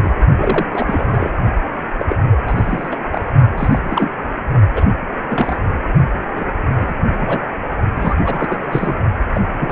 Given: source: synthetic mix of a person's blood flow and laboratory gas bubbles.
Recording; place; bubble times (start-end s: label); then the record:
Doppler ultrasound of blood flow; precordium
0.00-0.14 s: bubbles
0.38-0.66 s: bubbles
0.72-1.32 s: bubbles
1.99-2.05 s: bubbles
2.09-2.16 s: bubbles
2.30-2.38 s: bubbles
2.46-2.96 s: bubbles
3.12-3.32 s: bubbles
3.57-3.78 s: bubbles
3.84-4.10 s: bubbles
4.75-4.85 s: bubbles
5.28-5.58 s: bubbles
6.35-6.54 s: bubbles
6.79-6.95 s: bubbles
7.18-7.42 s: bubbles
7.95-8.14 s: bubbles
8.25-8.96 s: bubbles
9.34-9.44 s: bubbles
9.58-9.72 s: bubbles
From the record:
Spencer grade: 3 (all of the cardiac periods contain showers or single bubble signals, but not dominating or overriding the cardiac motion signals); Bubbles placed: only in the low amplitude regions of the cardiac cycle